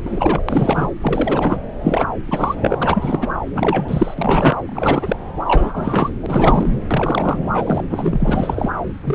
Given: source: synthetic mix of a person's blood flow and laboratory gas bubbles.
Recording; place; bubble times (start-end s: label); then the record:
Doppler ultrasound of blood flow; subclavian vein
0.05-0.42 s: bubbles
0.48-0.88 s: bubbles
1.01-1.58 s: bubbles
1.81-2.06 s: bubbles
2.25-2.55 s: bubbles
2.60-2.77 s: bubbles
2.81-3.27 s: bubbles
3.54-4.14 s: bubbles
4.17-4.55 s: bubbles
4.67-5.17 s: bubbles
5.47-6.09 s: bubbles
6.13-6.76 s: bubbles
6.90-7.38 s: bubbles
7.53-7.84 s: bubbles
7.90-8.71 s: bubbles
9.04-9.15 s: bubbles
From the record:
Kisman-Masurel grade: 342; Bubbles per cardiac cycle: rolling drumbeat, 9 or more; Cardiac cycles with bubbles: 100%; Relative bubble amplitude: moderate (0.250 to 0.450); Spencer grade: 3 (all of the cardiac periods contain showers or single bubble signals, but not dominating or overriding the cardiac motion signals); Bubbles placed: anywhere in the cardiac cycle